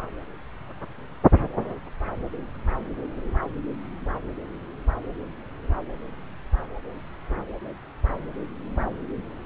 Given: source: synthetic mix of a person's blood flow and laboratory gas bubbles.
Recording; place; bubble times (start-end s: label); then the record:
Doppler ultrasound of blood flow; subclavian vein
no bubbles
From the record:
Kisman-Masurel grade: 000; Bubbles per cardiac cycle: 0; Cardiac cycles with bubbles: 0%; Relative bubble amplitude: no bubbles discernible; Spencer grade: 0 (complete lack of bubble signals)